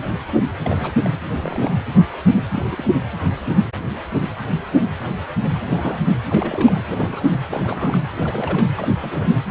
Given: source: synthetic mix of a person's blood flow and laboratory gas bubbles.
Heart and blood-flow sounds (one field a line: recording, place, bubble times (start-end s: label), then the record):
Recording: Doppler ultrasound of blood flow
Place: precordium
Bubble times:
0.60-0.92 s: bubbles
1.03-1.09 s: bubbles
1.42-1.73 s: bubbles
2.48-2.63 s: bubbles
2.70-3.00 s: bubbles
5.59-6.00 s: bubbles
6.30-6.81 s: bubbles
6.88-7.39 s: bubbles
7.48-7.98 s: bubbles
8.18-8.68 s: bubbles
8.77-8.88 s: bubbles
9.02-9.32 s: bubbles
From the record:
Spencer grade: 2 (many but less than half of the cardiac periods contain bubble signals, singularly or in groups)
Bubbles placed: anywhere in the cardiac cycle